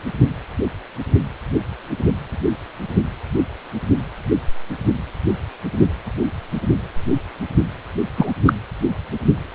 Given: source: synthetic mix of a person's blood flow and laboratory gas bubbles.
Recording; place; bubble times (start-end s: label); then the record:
Doppler ultrasound of blood flow; precordium
8.17-8.31 s: bubbles
8.45-8.53 s: bubbles
From the record:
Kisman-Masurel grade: 123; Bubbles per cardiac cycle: 1 to 2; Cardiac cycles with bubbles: 10 to 50%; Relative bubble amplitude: loud (0.450 to 0.775); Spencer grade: 2 (many but less than half of the cardiac periods contain bubble signals, singularly or in groups); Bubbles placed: anywhere in the cardiac cycle